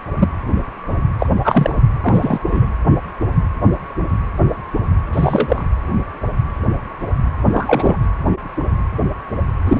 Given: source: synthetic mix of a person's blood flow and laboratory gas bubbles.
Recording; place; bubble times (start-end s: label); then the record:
Doppler ultrasound of blood flow; precordium
0.16-0.28 s: bubbles
1.19-1.27 s: bubbles
1.44-1.75 s: bubbles
2.02-2.39 s: bubbles
2.45-2.67 s: bubbles
5.13-5.65 s: bubbles
7.52-7.97 s: bubbles
9.64-9.80 s: bubbles
From the record:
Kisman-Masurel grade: 223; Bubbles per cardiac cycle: several, 3 to 8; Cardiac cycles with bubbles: 10 to 50%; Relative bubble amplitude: loud (0.450 to 0.775); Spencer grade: 2 (many but less than half of the cardiac periods contain bubble signals, singularly or in groups); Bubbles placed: anywhere in the cardiac cycle